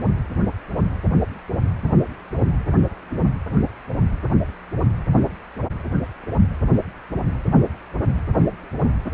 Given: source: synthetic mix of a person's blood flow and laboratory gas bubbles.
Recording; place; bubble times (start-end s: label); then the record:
Doppler ultrasound of blood flow; precordium
no bubbles
From the record:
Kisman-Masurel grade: 000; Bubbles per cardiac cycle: 0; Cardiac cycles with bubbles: 0%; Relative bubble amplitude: no bubbles discernible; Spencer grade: 0 (complete lack of bubble signals)